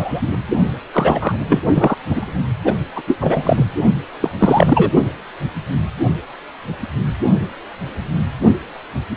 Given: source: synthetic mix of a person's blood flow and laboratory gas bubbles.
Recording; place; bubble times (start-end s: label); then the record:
Doppler ultrasound of blood flow; precordium
0.00-0.28 s: bubbles
0.31-0.38 s: bubbles
0.93-1.37 s: bubbles
1.50-1.61 s: bubbles
1.74-1.96 s: bubbles
2.09-2.32 s: bubbles
2.64-2.74 s: bubbles
2.96-3.03 s: bubbles
3.07-3.17 s: bubbles
3.21-3.65 s: bubbles
4.20-4.30 s: bubbles
4.38-4.92 s: bubbles
From the record:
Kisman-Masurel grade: 223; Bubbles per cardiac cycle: several, 3 to 8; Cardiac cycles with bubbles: 10 to 50%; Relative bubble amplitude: loud (0.450 to 0.775); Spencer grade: 2 (many but less than half of the cardiac periods contain bubble signals, singularly or in groups); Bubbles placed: only in the low amplitude regions of the cardiac cycle